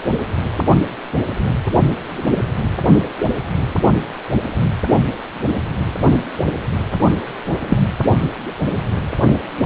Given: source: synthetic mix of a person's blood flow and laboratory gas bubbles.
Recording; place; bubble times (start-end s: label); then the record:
Doppler ultrasound of blood flow; precordium
7.68-7.78 s: bubbles
From the record:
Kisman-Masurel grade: 123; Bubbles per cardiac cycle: 1 to 2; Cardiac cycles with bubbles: 10 to 50%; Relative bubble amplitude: loud (0.450 to 0.775); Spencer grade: 2 (many but less than half of the cardiac periods contain bubble signals, singularly or in groups); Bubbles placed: anywhere in the cardiac cycle